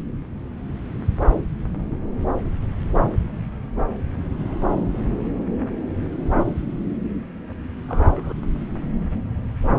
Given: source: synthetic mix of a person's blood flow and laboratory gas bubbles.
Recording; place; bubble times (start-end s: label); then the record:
Doppler ultrasound of blood flow; subclavian vein
7.88-8.34 s: bubbles
From the record:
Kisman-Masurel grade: 121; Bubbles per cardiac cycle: 1 to 2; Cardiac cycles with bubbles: 10 to 50%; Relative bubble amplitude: barely perceptible (0.100 to 0.250); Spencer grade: 2 (many but less than half of the cardiac periods contain bubble signals, singularly or in groups); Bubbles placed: anywhere in the cardiac cycle